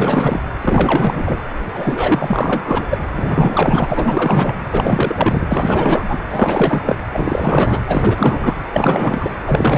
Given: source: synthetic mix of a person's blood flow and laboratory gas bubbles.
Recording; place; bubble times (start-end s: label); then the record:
Doppler ultrasound of blood flow; precordium
0.00-0.40 s: bubbles
0.61-1.40 s: bubbles
1.72-2.85 s: bubbles
2.90-2.98 s: bubbles
3.16-4.55 s: bubbles
4.71-5.46 s: bubbles
5.50-6.03 s: bubbles
6.08-6.19 s: bubbles
6.30-6.81 s: bubbles
6.84-6.96 s: bubbles
7.12-7.80 s: bubbles
7.87-8.55 s: bubbles
8.72-9.36 s: bubbles
9.45-9.78 s: bubbles
From the record:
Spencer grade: 4 (maximum detectable bubble signal sounding continuously throughout systole and diastole of every cardiac period, and overriding the amplitude of the normal cardiac signals); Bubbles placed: anywhere in the cardiac cycle